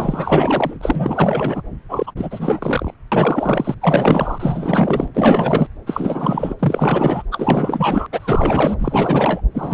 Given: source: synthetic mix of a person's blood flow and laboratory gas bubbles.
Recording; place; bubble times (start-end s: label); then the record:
Doppler ultrasound of blood flow; subclavian vein
0.00-1.61 s: bubbles
1.89-2.12 s: bubbles
2.16-2.94 s: bubbles
3.12-3.75 s: bubbles
3.81-5.08 s: bubbles
5.14-5.67 s: bubbles
5.86-6.55 s: bubbles
6.59-7.23 s: bubbles
7.31-8.06 s: bubbles
8.12-9.41 s: bubbles
9.54-9.74 s: bubbles
From the record:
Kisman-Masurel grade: 444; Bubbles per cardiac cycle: continuous sound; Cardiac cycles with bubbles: 100%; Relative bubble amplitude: maximal (0.775 to 0.999); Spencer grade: 4 (maximum detectable bubble signal sounding continuously throughout systole and diastole of every cardiac period, and overriding the amplitude of the normal cardiac signals); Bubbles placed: anywhere in the cardiac cycle